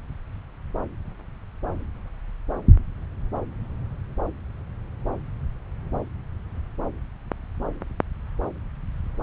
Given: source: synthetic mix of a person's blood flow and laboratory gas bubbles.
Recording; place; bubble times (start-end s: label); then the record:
Doppler ultrasound of blood flow; subclavian vein
no bubbles
From the record:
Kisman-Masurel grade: 000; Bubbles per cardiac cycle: 0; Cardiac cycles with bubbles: 0%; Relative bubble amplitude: no bubbles discernible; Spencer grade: 0 (complete lack of bubble signals)